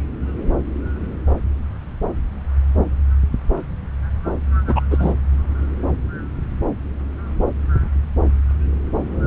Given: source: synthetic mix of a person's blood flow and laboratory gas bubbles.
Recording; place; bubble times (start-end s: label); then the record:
Doppler ultrasound of blood flow; subclavian vein
4.67-4.81 s: bubbles
4.90-5.13 s: bubbles
From the record:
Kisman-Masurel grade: 223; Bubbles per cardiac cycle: several, 3 to 8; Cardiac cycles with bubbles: 10 to 50%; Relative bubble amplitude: loud (0.450 to 0.775); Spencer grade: 2 (many but less than half of the cardiac periods contain bubble signals, singularly or in groups); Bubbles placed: anywhere in the cardiac cycle